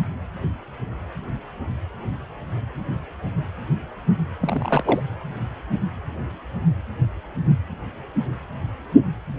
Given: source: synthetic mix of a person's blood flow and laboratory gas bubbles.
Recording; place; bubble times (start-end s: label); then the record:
Doppler ultrasound of blood flow; precordium
4.41-5.03 s: bubbles
From the record:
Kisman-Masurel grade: 212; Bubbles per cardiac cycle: several, 3 to 8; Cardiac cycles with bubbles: 1 to 10%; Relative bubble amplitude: moderate (0.250 to 0.450); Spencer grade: 1 (occasional bubble signal discernible with the cardiac motion signal, with majority of cardiac periods free of bubbles); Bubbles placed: anywhere in the cardiac cycle